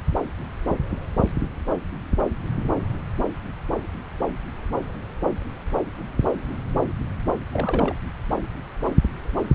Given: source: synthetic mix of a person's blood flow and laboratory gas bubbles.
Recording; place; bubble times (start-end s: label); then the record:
Doppler ultrasound of blood flow; subclavian vein
7.51-7.94 s: bubbles
From the record:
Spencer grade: 1 (occasional bubble signal discernible with the cardiac motion signal, with majority of cardiac periods free of bubbles); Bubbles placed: anywhere in the cardiac cycle